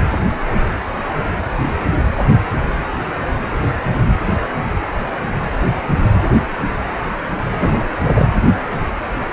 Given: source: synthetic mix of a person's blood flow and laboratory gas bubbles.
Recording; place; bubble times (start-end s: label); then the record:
Doppler ultrasound of blood flow; precordium
7.60-7.84 s: bubbles
8.04-8.27 s: bubbles
From the record:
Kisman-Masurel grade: 113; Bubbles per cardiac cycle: 1 to 2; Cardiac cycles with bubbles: 1 to 10%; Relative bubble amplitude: loud (0.450 to 0.775); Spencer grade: 1 (occasional bubble signal discernible with the cardiac motion signal, with majority of cardiac periods free of bubbles); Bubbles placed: anywhere in the cardiac cycle